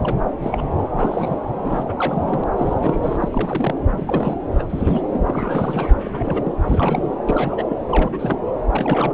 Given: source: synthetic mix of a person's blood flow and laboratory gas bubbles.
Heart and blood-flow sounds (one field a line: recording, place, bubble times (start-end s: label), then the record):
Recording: Doppler ultrasound of blood flow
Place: subclavian vein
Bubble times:
0.00-0.17 s: bubbles
0.43-0.62 s: bubbles
0.92-1.39 s: bubbles
1.64-1.84 s: bubbles
1.88-1.94 s: bubbles
1.97-2.44 s: bubbles
2.53-3.75 s: bubbles
3.91-4.35 s: bubbles
4.59-4.63 s: bubbles
4.69-5.02 s: bubbles
5.10-5.89 s: bubbles
6.03-6.54 s: bubbles
6.67-7.13 s: bubbles
7.27-7.64 s: bubbles
7.68-7.76 s: bubbles
7.88-8.45 s: bubbles
8.73-9.13 s: bubbles
From the record:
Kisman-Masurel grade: 342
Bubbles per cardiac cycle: rolling drumbeat, 9 or more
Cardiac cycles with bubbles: 100%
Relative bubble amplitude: moderate (0.250 to 0.450)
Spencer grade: 3 (all of the cardiac periods contain showers or single bubble signals, but not dominating or overriding the cardiac motion signals)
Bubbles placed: anywhere in the cardiac cycle